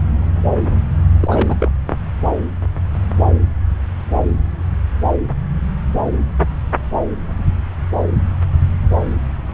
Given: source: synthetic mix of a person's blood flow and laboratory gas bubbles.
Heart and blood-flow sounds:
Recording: Doppler ultrasound of blood flow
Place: subclavian vein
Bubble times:
1.21-1.56 s: bubbles
1.59-1.72 s: bubbles
From the record:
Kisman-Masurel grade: 212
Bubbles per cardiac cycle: several, 3 to 8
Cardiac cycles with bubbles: 1 to 10%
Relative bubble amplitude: moderate (0.250 to 0.450)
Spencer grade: 1 (occasional bubble signal discernible with the cardiac motion signal, with majority of cardiac periods free of bubbles)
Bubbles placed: anywhere in the cardiac cycle

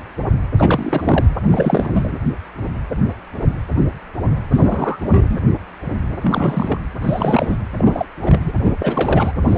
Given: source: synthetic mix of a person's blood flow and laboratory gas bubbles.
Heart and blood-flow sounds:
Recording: Doppler ultrasound of blood flow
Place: precordium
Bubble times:
0.58-1.25 s: bubbles
1.49-2.12 s: bubbles
4.50-4.98 s: bubbles
5.00-5.39 s: bubbles
6.21-6.79 s: bubbles
7.01-7.56 s: bubbles
7.78-8.06 s: bubbles
8.22-8.53 s: bubbles
8.64-8.77 s: bubbles
8.79-9.32 s: bubbles
9.45-9.58 s: bubbles
From the record:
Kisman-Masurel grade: 332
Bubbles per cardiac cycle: rolling drumbeat, 9 or more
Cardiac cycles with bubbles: 50 to 99%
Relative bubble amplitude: moderate (0.250 to 0.450)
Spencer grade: 3 (all of the cardiac periods contain showers or single bubble signals, but not dominating or overriding the cardiac motion signals)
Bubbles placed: anywhere in the cardiac cycle

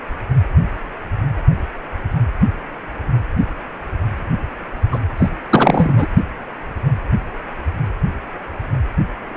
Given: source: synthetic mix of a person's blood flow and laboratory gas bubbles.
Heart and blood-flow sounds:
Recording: Doppler ultrasound of blood flow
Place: precordium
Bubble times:
4.92-4.99 s: bubbles
5.17-5.29 s: bubbles
5.50-6.06 s: bubbles
From the record:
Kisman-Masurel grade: 213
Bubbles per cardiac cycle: several, 3 to 8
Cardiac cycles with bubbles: 1 to 10%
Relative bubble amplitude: loud (0.450 to 0.775)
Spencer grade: 1 (occasional bubble signal discernible with the cardiac motion signal, with majority of cardiac periods free of bubbles)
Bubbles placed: only in the low amplitude regions of the cardiac cycle

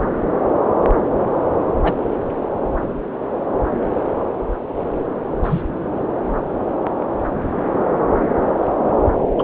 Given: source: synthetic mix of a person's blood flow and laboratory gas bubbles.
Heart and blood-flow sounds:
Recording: Doppler ultrasound of blood flow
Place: subclavian vein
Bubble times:
1.83-1.93 s: bubbles
5.43-5.62 s: bubbles
9.38-9.43 s: bubbles
From the record:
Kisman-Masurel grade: 123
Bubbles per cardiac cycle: 1 to 2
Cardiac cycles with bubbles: 10 to 50%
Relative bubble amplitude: loud (0.450 to 0.775)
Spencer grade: 2 (many but less than half of the cardiac periods contain bubble signals, singularly or in groups)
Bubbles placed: anywhere in the cardiac cycle

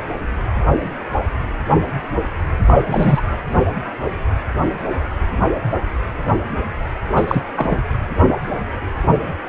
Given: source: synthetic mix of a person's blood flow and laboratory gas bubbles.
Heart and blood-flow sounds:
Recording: Doppler ultrasound of blood flow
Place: precordium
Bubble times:
2.67-3.21 s: bubbles
7.15-7.43 s: bubbles
7.56-7.77 s: bubbles
9.46-9.49 s: bubbles
From the record:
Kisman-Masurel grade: 223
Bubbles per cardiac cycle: several, 3 to 8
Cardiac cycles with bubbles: 10 to 50%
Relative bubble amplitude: loud (0.450 to 0.775)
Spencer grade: 2 (many but less than half of the cardiac periods contain bubble signals, singularly or in groups)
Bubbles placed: anywhere in the cardiac cycle

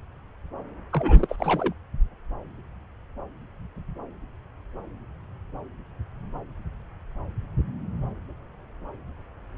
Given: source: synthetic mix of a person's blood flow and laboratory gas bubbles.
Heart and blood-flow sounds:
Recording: Doppler ultrasound of blood flow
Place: subclavian vein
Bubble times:
0.92-1.73 s: bubbles
From the record:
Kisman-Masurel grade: 212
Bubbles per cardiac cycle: several, 3 to 8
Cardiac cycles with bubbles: 1 to 10%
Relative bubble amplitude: moderate (0.250 to 0.450)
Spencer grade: 1 (occasional bubble signal discernible with the cardiac motion signal, with majority of cardiac periods free of bubbles)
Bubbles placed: anywhere in the cardiac cycle

